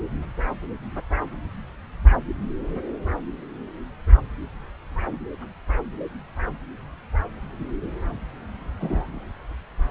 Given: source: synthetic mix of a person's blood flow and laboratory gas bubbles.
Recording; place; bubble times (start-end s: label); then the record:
Doppler ultrasound of blood flow; subclavian vein
8.80-9.24 s: bubbles
From the record:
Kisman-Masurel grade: 112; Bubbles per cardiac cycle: 1 to 2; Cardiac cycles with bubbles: 1 to 10%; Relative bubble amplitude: moderate (0.250 to 0.450); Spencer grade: 1 (occasional bubble signal discernible with the cardiac motion signal, with majority of cardiac periods free of bubbles); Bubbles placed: anywhere in the cardiac cycle